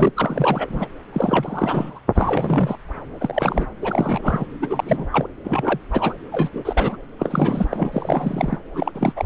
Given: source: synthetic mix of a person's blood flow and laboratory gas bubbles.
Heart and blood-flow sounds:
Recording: Doppler ultrasound of blood flow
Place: subclavian vein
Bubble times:
0.00-0.11 s: bubbles
0.16-0.88 s: bubbles
1.12-1.99 s: bubbles
2.15-2.76 s: bubbles
3.19-3.66 s: bubbles
3.82-4.45 s: bubbles
4.62-5.06 s: bubbles
5.12-5.27 s: bubbles
5.43-5.79 s: bubbles
5.92-6.14 s: bubbles
6.32-6.49 s: bubbles
6.53-6.97 s: bubbles
7.19-7.68 s: bubbles
7.71-8.57 s: bubbles
8.74-8.92 s: bubbles
8.95-9.12 s: bubbles
9.16-9.26 s: bubbles
From the record:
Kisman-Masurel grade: 342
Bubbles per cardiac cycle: rolling drumbeat, 9 or more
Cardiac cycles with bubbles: 100%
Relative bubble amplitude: moderate (0.250 to 0.450)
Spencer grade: 3 (all of the cardiac periods contain showers or single bubble signals, but not dominating or overriding the cardiac motion signals)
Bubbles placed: anywhere in the cardiac cycle

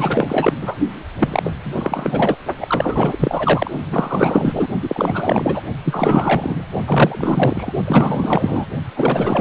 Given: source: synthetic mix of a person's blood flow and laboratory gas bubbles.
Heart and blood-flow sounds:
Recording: Doppler ultrasound of blood flow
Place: precordium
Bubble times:
0.00-0.53 s: bubbles
0.60-0.77 s: bubbles
1.19-1.53 s: bubbles
1.64-2.36 s: bubbles
2.59-3.17 s: bubbles
3.19-3.71 s: bubbles
3.90-4.67 s: bubbles
4.82-5.62 s: bubbles
5.84-6.63 s: bubbles
6.85-7.73 s: bubbles
7.85-8.66 s: bubbles
8.96-9.41 s: bubbles
From the record:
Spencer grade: 4 (maximum detectable bubble signal sounding continuously throughout systole and diastole of every cardiac period, and overriding the amplitude of the normal cardiac signals)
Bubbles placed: only in the low amplitude regions of the cardiac cycle

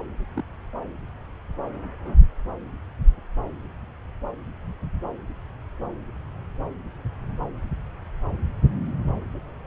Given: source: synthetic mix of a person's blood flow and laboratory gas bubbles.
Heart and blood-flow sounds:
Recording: Doppler ultrasound of blood flow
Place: subclavian vein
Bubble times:
0.35-0.43 s: bubbles
From the record:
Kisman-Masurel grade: 111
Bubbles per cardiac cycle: 1 to 2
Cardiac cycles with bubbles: 1 to 10%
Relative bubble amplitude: barely perceptible (0.100 to 0.250)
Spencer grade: 1 (occasional bubble signal discernible with the cardiac motion signal, with majority of cardiac periods free of bubbles)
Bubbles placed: anywhere in the cardiac cycle

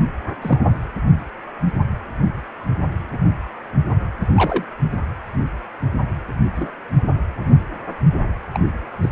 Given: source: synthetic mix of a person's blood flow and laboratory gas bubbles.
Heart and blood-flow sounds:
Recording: Doppler ultrasound of blood flow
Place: precordium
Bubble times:
0.42-0.58 s: bubbles
4.22-4.65 s: bubbles
6.56-6.73 s: bubbles
8.53-8.59 s: bubbles
9.02-9.09 s: bubbles
From the record:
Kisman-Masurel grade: 122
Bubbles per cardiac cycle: 1 to 2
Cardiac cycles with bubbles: 10 to 50%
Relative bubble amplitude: moderate (0.250 to 0.450)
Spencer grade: 2 (many but less than half of the cardiac periods contain bubble signals, singularly or in groups)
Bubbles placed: anywhere in the cardiac cycle

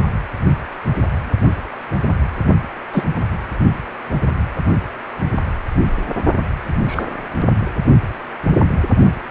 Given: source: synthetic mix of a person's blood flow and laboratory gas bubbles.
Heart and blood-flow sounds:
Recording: Doppler ultrasound of blood flow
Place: precordium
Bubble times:
2.93-3.06 s: bubbles
6.86-7.04 s: bubbles
From the record:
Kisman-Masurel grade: 123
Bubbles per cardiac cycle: 1 to 2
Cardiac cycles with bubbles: 10 to 50%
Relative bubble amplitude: loud (0.450 to 0.775)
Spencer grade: 2 (many but less than half of the cardiac periods contain bubble signals, singularly or in groups)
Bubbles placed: only in the low amplitude regions of the cardiac cycle

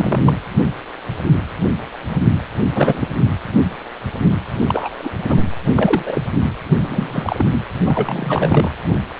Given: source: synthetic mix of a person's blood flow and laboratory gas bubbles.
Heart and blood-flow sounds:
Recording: Doppler ultrasound of blood flow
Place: precordium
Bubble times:
0.00-0.35 s: bubbles
2.75-3.08 s: bubbles
4.66-4.89 s: bubbles
4.99-5.13 s: bubbles
5.29-5.42 s: bubbles
5.76-6.21 s: bubbles
6.71-7.44 s: bubbles
7.85-8.75 s: bubbles
From the record:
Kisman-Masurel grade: 232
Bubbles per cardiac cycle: several, 3 to 8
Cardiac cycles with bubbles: 50 to 99%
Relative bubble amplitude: moderate (0.250 to 0.450)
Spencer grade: 3 (all of the cardiac periods contain showers or single bubble signals, but not dominating or overriding the cardiac motion signals)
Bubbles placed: anywhere in the cardiac cycle

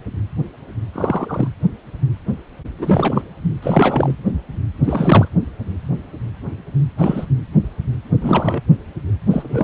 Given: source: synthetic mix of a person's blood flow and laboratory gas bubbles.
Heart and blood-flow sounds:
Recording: Doppler ultrasound of blood flow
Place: precordium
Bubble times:
0.92-1.48 s: bubbles
2.79-3.21 s: bubbles
3.62-4.15 s: bubbles
4.84-5.28 s: bubbles
6.97-7.25 s: bubbles
8.21-8.62 s: bubbles
9.30-9.64 s: bubbles
From the record:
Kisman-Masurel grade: 223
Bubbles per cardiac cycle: several, 3 to 8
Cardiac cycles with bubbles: 10 to 50%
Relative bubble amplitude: loud (0.450 to 0.775)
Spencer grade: 2 (many but less than half of the cardiac periods contain bubble signals, singularly or in groups)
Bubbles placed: anywhere in the cardiac cycle

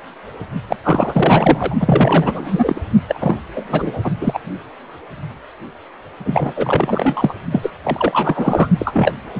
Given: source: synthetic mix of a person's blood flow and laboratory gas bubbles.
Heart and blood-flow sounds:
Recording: Doppler ultrasound of blood flow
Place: precordium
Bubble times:
0.67-0.77 s: bubbles
0.84-1.76 s: bubbles
1.80-2.81 s: bubbles
3.07-3.35 s: bubbles
3.54-4.12 s: bubbles
4.21-4.39 s: bubbles
6.25-7.34 s: bubbles
7.51-7.71 s: bubbles
7.83-8.70 s: bubbles
8.79-9.14 s: bubbles
9.34-9.40 s: bubbles
From the record:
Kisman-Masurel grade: 333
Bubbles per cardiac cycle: rolling drumbeat, 9 or more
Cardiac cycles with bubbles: 50 to 99%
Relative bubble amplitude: loud (0.450 to 0.775)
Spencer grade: 3 (all of the cardiac periods contain showers or single bubble signals, but not dominating or overriding the cardiac motion signals)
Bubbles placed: only in the low amplitude regions of the cardiac cycle

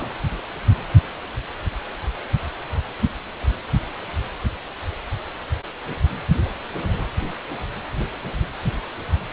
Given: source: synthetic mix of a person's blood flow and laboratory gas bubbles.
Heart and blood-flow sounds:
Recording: Doppler ultrasound of blood flow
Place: precordium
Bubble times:
0.00-0.09 s: bubbles
From the record:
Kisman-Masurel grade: 111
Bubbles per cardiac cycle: 1 to 2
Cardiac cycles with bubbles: 1 to 10%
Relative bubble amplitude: barely perceptible (0.100 to 0.250)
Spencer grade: 1 (occasional bubble signal discernible with the cardiac motion signal, with majority of cardiac periods free of bubbles)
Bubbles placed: anywhere in the cardiac cycle

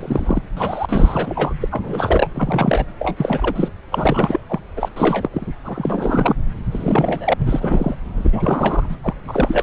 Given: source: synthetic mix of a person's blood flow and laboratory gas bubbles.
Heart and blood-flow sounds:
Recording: Doppler ultrasound of blood flow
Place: subclavian vein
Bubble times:
0.00-0.43 s: bubbles
0.57-0.86 s: bubbles
0.88-1.54 s: bubbles
1.62-1.68 s: bubbles
1.71-2.27 s: bubbles
2.34-2.85 s: bubbles
3.00-3.71 s: bubbles
3.91-4.40 s: bubbles
4.49-4.59 s: bubbles
4.76-4.88 s: bubbles
4.96-5.29 s: bubbles
5.33-5.46 s: bubbles
5.64-6.34 s: bubbles
6.71-7.34 s: bubbles
7.38-7.95 s: bubbles
8.17-8.87 s: bubbles
8.89-8.96 s: bubbles
9.03-9.14 s: bubbles
9.28-9.63 s: bubbles
From the record:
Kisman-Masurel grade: 342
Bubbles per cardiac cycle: rolling drumbeat, 9 or more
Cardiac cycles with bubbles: 100%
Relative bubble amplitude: moderate (0.250 to 0.450)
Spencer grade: 3 (all of the cardiac periods contain showers or single bubble signals, but not dominating or overriding the cardiac motion signals)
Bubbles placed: anywhere in the cardiac cycle

